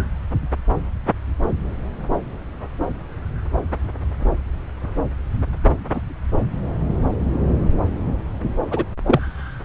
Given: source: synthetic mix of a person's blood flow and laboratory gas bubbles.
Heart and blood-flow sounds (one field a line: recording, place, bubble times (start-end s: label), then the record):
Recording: Doppler ultrasound of blood flow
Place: subclavian vein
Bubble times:
5.93-6.01 s: bubbles
8.71-8.85 s: bubbles
9.06-9.21 s: bubbles
From the record:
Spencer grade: 2 (many but less than half of the cardiac periods contain bubble signals, singularly or in groups)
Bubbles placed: anywhere in the cardiac cycle